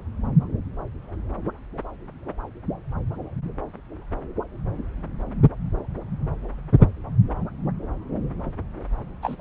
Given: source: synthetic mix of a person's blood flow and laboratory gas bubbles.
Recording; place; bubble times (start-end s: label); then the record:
Doppler ultrasound of blood flow; subclavian vein
9.22-9.36 s: bubbles
9.39-9.41 s: bubbles
From the record:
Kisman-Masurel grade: 112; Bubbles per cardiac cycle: 1 to 2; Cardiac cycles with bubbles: 1 to 10%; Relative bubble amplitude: moderate (0.250 to 0.450); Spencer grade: 1 (occasional bubble signal discernible with the cardiac motion signal, with majority of cardiac periods free of bubbles); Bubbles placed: anywhere in the cardiac cycle